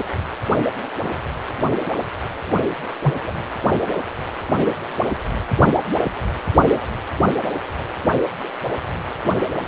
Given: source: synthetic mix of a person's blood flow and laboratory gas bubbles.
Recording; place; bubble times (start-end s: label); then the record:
Doppler ultrasound of blood flow; precordium
3.03-3.13 s: bubbles
3.26-3.32 s: bubbles
From the record:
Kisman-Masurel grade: 112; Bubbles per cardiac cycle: 1 to 2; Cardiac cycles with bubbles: 1 to 10%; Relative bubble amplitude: moderate (0.250 to 0.450); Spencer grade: 1 (occasional bubble signal discernible with the cardiac motion signal, with majority of cardiac periods free of bubbles); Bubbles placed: only in the low amplitude regions of the cardiac cycle